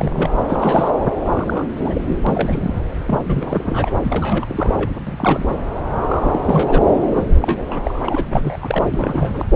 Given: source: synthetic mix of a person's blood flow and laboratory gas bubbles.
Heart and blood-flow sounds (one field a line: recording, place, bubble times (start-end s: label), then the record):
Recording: Doppler ultrasound of blood flow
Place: subclavian vein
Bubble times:
0.00-0.29 s: bubbles
0.45-0.92 s: bubbles
1.25-1.68 s: bubbles
1.76-2.01 s: bubbles
2.08-2.20 s: bubbles
2.27-2.74 s: bubbles
3.06-3.93 s: bubbles
4.02-4.91 s: bubbles
5.06-5.48 s: bubbles
5.98-6.41 s: bubbles
6.46-6.94 s: bubbles
7.15-7.24 s: bubbles
7.40-7.64 s: bubbles
7.67-8.24 s: bubbles
8.32-8.91 s: bubbles
8.94-9.46 s: bubbles
From the record:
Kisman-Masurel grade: 342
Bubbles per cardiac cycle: rolling drumbeat, 9 or more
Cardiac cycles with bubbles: 100%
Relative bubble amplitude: moderate (0.250 to 0.450)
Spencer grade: 3 (all of the cardiac periods contain showers or single bubble signals, but not dominating or overriding the cardiac motion signals)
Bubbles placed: anywhere in the cardiac cycle